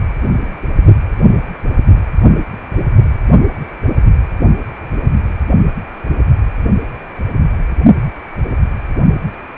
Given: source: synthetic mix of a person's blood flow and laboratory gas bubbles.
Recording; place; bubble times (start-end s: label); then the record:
Doppler ultrasound of blood flow; precordium
no bubbles
From the record:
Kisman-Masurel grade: 000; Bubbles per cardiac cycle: 0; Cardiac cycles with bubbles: 0%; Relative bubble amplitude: no bubbles discernible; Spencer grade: 0 (complete lack of bubble signals)